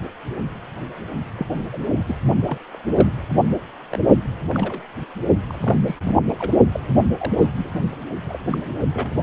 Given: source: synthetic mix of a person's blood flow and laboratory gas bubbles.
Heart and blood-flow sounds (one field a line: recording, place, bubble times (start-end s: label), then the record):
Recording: Doppler ultrasound of blood flow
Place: precordium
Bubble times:
1.36-1.47 s: bubbles
1.54-1.64 s: bubbles
1.73-1.90 s: bubbles
2.08-2.15 s: bubbles
2.47-2.58 s: bubbles
2.73-2.79 s: bubbles
2.94-3.09 s: bubbles
3.90-3.98 s: bubbles
4.48-4.82 s: bubbles
5.49-5.96 s: bubbles
6.01-6.16 s: bubbles
6.29-6.34 s: bubbles
6.38-6.51 s: bubbles
6.71-6.80 s: bubbles
7.19-7.33 s: bubbles
7.38-7.50 s: bubbles
7.57-7.71 s: bubbles
8.26-8.59 s: bubbles
8.69-8.73 s: bubbles
8.93-9.11 s: bubbles
9.18-9.21 s: bubbles
From the record:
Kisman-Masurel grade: 221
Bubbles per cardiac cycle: several, 3 to 8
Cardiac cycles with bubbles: 10 to 50%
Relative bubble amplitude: barely perceptible (0.100 to 0.250)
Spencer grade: 2 (many but less than half of the cardiac periods contain bubble signals, singularly or in groups)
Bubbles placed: only in the low amplitude regions of the cardiac cycle